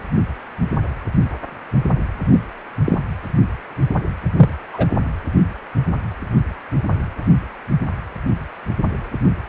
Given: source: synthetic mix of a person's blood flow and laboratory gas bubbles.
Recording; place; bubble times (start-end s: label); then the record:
Doppler ultrasound of blood flow; precordium
2.30-2.40 s: bubbles
2.85-2.99 s: bubbles
4.36-4.50 s: bubbles
4.73-4.86 s: bubbles
From the record:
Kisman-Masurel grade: 123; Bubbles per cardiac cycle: 1 to 2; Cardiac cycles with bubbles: 10 to 50%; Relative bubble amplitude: loud (0.450 to 0.775); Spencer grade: 2 (many but less than half of the cardiac periods contain bubble signals, singularly or in groups); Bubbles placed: anywhere in the cardiac cycle